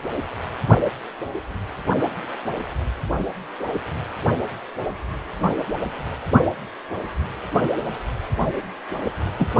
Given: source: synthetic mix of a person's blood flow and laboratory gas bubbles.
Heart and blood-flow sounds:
Doppler ultrasound of blood flow; precordium
9.38-9.51 s: bubbles
From the record:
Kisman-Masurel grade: 112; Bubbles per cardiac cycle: 1 to 2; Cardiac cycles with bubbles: 1 to 10%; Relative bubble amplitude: moderate (0.250 to 0.450); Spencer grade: 1 (occasional bubble signal discernible with the cardiac motion signal, with majority of cardiac periods free of bubbles); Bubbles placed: anywhere in the cardiac cycle

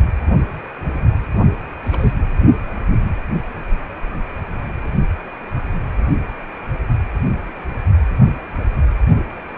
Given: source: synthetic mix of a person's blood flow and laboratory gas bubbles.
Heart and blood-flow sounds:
Doppler ultrasound of blood flow; precordium
1.85-2.15 s: bubbles
From the record:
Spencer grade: 1 (occasional bubble signal discernible with the cardiac motion signal, with majority of cardiac periods free of bubbles); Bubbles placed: only in the low amplitude regions of the cardiac cycle

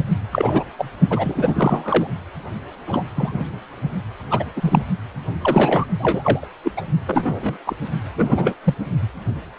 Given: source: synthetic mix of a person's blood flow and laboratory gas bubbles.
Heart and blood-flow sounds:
Doppler ultrasound of blood flow; precordium
0.32-0.64 s: bubbles
0.78-0.90 s: bubbles
1.10-2.07 s: bubbles
2.87-3.04 s: bubbles
3.16-3.46 s: bubbles
4.30-4.44 s: bubbles
4.56-4.83 s: bubbles
5.41-5.86 s: bubbles
5.99-6.47 s: bubbles
6.63-6.72 s: bubbles
6.76-6.81 s: bubbles
7.06-7.57 s: bubbles
7.66-7.76 s: bubbles
8.17-8.54 s: bubbles
8.63-8.74 s: bubbles
From the record:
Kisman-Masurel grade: 243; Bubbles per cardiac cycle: several, 3 to 8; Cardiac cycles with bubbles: 100%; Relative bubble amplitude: loud (0.450 to 0.775); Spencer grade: 3 (all of the cardiac periods contain showers or single bubble signals, but not dominating or overriding the cardiac motion signals); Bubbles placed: only in the low amplitude regions of the cardiac cycle

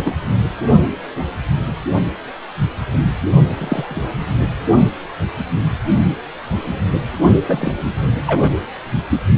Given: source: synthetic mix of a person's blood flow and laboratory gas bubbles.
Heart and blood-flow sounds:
Doppler ultrasound of blood flow; precordium
0.00-0.16 s: bubbles
3.57-4.09 s: bubbles
7.47-7.71 s: bubbles
8.27-8.53 s: bubbles
From the record:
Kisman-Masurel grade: 122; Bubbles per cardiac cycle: 1 to 2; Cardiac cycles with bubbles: 10 to 50%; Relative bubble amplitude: moderate (0.250 to 0.450); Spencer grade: 2 (many but less than half of the cardiac periods contain bubble signals, singularly or in groups); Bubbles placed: anywhere in the cardiac cycle

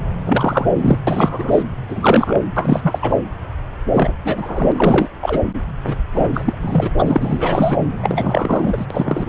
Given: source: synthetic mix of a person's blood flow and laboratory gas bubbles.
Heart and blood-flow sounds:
Doppler ultrasound of blood flow; subclavian vein
0.27-0.72 s: bubbles
0.75-0.99 s: bubbles
1.07-1.62 s: bubbles
1.89-2.40 s: bubbles
2.56-2.98 s: bubbles
3.02-3.19 s: bubbles
3.93-4.13 s: bubbles
4.24-5.07 s: bubbles
5.21-5.42 s: bubbles
5.86-5.96 s: bubbles
6.13-6.58 s: bubbles
6.61-6.91 s: bubbles
6.98-7.79 s: bubbles
7.99-8.85 s: bubbles
8.90-9.29 s: bubbles
From the record:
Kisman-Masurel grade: 343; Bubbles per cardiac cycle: rolling drumbeat, 9 or more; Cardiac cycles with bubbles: 100%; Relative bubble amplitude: loud (0.450 to 0.775); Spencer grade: 3 (all of the cardiac periods contain showers or single bubble signals, but not dominating or overriding the cardiac motion signals); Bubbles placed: anywhere in the cardiac cycle

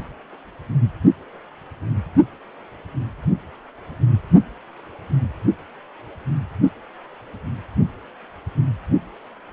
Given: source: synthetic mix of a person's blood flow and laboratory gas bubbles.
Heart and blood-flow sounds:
Doppler ultrasound of blood flow; precordium
no bubbles
From the record:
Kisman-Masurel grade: 000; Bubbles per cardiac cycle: 0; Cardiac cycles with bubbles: 0%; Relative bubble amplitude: no bubbles discernible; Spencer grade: 0 (complete lack of bubble signals)

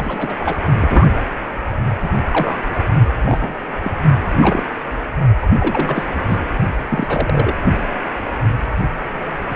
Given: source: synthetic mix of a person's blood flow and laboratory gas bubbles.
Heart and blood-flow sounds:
Doppler ultrasound of blood flow; precordium
0.00-0.36 s: bubbles
0.39-0.60 s: bubbles
0.78-1.21 s: bubbles
2.02-2.09 s: bubbles
2.25-2.84 s: bubbles
3.25-3.55 s: bubbles
3.84-3.92 s: bubbles
4.29-4.63 s: bubbles
5.42-5.46 s: bubbles
5.58-6.07 s: bubbles
6.26-6.38 s: bubbles
6.88-7.54 s: bubbles
From the record:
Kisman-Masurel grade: 232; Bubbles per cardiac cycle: several, 3 to 8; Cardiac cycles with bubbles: 50 to 99%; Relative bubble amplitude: moderate (0.250 to 0.450); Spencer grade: 3 (all of the cardiac periods contain showers or single bubble signals, but not dominating or overriding the cardiac motion signals); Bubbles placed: only in the low amplitude regions of the cardiac cycle

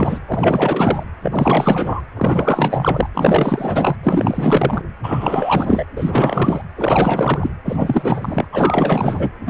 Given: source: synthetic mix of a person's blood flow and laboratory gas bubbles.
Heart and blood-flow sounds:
Doppler ultrasound of blood flow; precordium
0.00-0.19 s: bubbles
0.27-1.03 s: bubbles
1.22-2.01 s: bubbles
2.16-3.10 s: bubbles
3.14-3.96 s: bubbles
4.03-4.82 s: bubbles
5.03-5.85 s: bubbles
5.96-6.62 s: bubbles
6.75-7.50 s: bubbles
7.65-8.46 s: bubbles
8.52-9.29 s: bubbles
9.46-9.50 s: bubbles
From the record:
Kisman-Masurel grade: 444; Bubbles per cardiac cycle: continuous sound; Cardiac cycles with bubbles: 100%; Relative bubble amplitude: maximal (0.775 to 0.999); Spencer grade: 4 (maximum detectable bubble signal sounding continuously throughout systole and diastole of every cardiac period, and overriding the amplitude of the normal cardiac signals); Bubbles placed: anywhere in the cardiac cycle

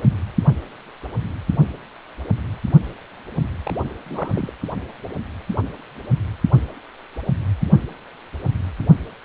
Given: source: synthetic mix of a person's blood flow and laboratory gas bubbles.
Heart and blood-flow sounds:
Doppler ultrasound of blood flow; precordium
3.65-3.74 s: bubbles
3.99-4.51 s: bubbles
From the record:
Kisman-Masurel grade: 221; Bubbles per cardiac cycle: several, 3 to 8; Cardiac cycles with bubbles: 10 to 50%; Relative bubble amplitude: barely perceptible (0.100 to 0.250); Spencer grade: 2 (many but less than half of the cardiac periods contain bubble signals, singularly or in groups); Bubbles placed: anywhere in the cardiac cycle

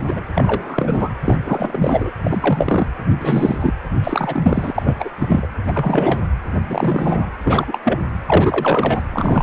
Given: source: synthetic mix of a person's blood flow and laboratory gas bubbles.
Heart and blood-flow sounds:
Doppler ultrasound of blood flow; precordium
0.00-0.04 s: bubbles
0.07-0.21 s: bubbles
0.35-1.09 s: bubbles
1.25-1.36 s: bubbles
1.46-2.11 s: bubbles
2.23-2.87 s: bubbles
3.20-3.58 s: bubbles
3.60-3.74 s: bubbles
4.04-4.95 s: bubbles
4.99-5.09 s: bubbles
5.19-5.48 s: bubbles
5.67-6.21 s: bubbles
6.64-7.32 s: bubbles
7.44-7.79 s: bubbles
7.84-8.02 s: bubbles
8.26-9.03 s: bubbles
9.12-9.42 s: bubbles
From the record:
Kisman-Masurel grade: 343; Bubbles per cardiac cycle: rolling drumbeat, 9 or more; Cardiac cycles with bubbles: 100%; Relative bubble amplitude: loud (0.450 to 0.775); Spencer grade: 3 (all of the cardiac periods contain showers or single bubble signals, but not dominating or overriding the cardiac motion signals); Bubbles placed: anywhere in the cardiac cycle

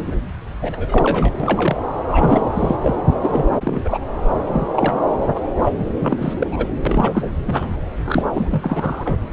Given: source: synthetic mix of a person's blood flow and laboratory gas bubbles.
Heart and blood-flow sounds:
Doppler ultrasound of blood flow; subclavian vein
0.00-0.16 s: bubbles
0.61-1.33 s: bubbles
1.40-1.76 s: bubbles
2.07-2.76 s: bubbles
2.83-2.94 s: bubbles
3.21-3.46 s: bubbles
3.52-3.98 s: bubbles
4.53-5.11 s: bubbles
5.21-5.28 s: bubbles
5.35-5.40 s: bubbles
5.56-5.73 s: bubbles
5.78-5.94 s: bubbles
6.00-6.33 s: bubbles
6.40-6.47 s: bubbles
6.50-6.68 s: bubbles
6.85-7.33 s: bubbles
7.47-7.70 s: bubbles
8.05-8.25 s: bubbles
8.29-9.19 s: bubbles
From the record:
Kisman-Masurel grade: 342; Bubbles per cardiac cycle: rolling drumbeat, 9 or more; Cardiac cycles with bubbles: 100%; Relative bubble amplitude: moderate (0.250 to 0.450); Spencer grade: 3 (all of the cardiac periods contain showers or single bubble signals, but not dominating or overriding the cardiac motion signals); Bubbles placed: anywhere in the cardiac cycle

